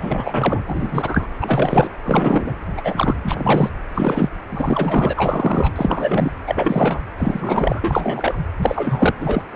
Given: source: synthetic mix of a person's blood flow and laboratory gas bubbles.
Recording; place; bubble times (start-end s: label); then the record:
Doppler ultrasound of blood flow; precordium
0.01-0.62 s: bubbles
0.67-1.27 s: bubbles
1.41-1.89 s: bubbles
2.05-2.56 s: bubbles
2.77-3.15 s: bubbles
3.24-3.70 s: bubbles
3.95-4.29 s: bubbles
4.49-5.13 s: bubbles
5.16-5.71 s: bubbles
5.75-6.32 s: bubbles
6.46-7.00 s: bubbles
7.17-8.38 s: bubbles
8.61-9.14 s: bubbles
9.19-9.42 s: bubbles
9.51-9.56 s: bubbles
From the record:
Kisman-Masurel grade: 343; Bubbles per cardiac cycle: rolling drumbeat, 9 or more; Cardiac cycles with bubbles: 100%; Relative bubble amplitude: loud (0.450 to 0.775); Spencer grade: 3 (all of the cardiac periods contain showers or single bubble signals, but not dominating or overriding the cardiac motion signals); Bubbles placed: anywhere in the cardiac cycle